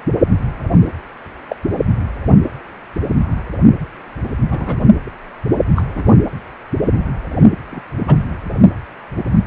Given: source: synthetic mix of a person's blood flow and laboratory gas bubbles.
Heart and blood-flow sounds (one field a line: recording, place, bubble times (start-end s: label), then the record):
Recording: Doppler ultrasound of blood flow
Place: precordium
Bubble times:
1.49-1.55 s: bubbles
4.51-4.88 s: bubbles
5.76-5.83 s: bubbles
5.95-6.08 s: bubbles
7.71-7.82 s: bubbles
8.07-8.16 s: bubbles
From the record:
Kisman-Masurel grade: 122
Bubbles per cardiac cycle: 1 to 2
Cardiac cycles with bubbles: 10 to 50%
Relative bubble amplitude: moderate (0.250 to 0.450)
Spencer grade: 2 (many but less than half of the cardiac periods contain bubble signals, singularly or in groups)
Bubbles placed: anywhere in the cardiac cycle